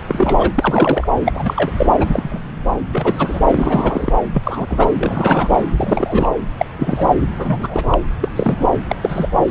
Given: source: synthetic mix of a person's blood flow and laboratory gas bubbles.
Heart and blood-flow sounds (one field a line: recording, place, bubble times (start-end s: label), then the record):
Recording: Doppler ultrasound of blood flow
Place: subclavian vein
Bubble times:
0.07-0.51 s: bubbles
0.55-1.07 s: bubbles
1.24-1.32 s: bubbles
1.34-1.72 s: bubbles
1.77-1.91 s: bubbles
1.99-2.39 s: bubbles
2.91-3.40 s: bubbles
3.47-4.12 s: bubbles
4.34-4.88 s: bubbles
5.00-5.61 s: bubbles
5.76-6.30 s: bubbles
6.58-6.66 s: bubbles
6.78-7.06 s: bubbles
7.39-8.00 s: bubbles
8.21-8.29 s: bubbles
8.35-8.65 s: bubbles
8.71-8.76 s: bubbles
8.88-8.96 s: bubbles
9.01-9.29 s: bubbles
9.47-9.51 s: bubbles
From the record:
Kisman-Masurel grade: 243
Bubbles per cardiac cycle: several, 3 to 8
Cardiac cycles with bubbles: 100%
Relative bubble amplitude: loud (0.450 to 0.775)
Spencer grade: 3 (all of the cardiac periods contain showers or single bubble signals, but not dominating or overriding the cardiac motion signals)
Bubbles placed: anywhere in the cardiac cycle